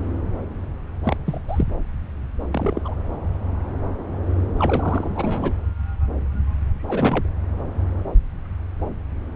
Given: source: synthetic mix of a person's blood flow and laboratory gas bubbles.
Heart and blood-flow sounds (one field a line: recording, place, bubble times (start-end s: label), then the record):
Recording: Doppler ultrasound of blood flow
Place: subclavian vein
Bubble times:
1.04-1.16 s: bubbles
1.26-1.41 s: bubbles
1.48-1.64 s: bubbles
2.51-2.81 s: bubbles
2.84-2.94 s: bubbles
4.57-5.53 s: bubbles
6.88-7.28 s: bubbles
From the record:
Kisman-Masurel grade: 221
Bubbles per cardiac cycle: several, 3 to 8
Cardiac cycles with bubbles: 10 to 50%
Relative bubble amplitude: barely perceptible (0.100 to 0.250)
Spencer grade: 2 (many but less than half of the cardiac periods contain bubble signals, singularly or in groups)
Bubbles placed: anywhere in the cardiac cycle